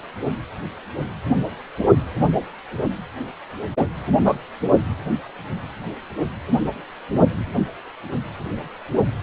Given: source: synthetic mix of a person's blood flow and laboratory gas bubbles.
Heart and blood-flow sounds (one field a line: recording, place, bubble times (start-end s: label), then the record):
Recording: Doppler ultrasound of blood flow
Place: precordium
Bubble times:
4.24-4.33 s: bubbles
From the record:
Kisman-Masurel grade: 113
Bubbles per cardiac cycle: 1 to 2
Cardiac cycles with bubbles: 1 to 10%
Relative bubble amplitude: loud (0.450 to 0.775)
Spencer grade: 1 (occasional bubble signal discernible with the cardiac motion signal, with majority of cardiac periods free of bubbles)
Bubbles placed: anywhere in the cardiac cycle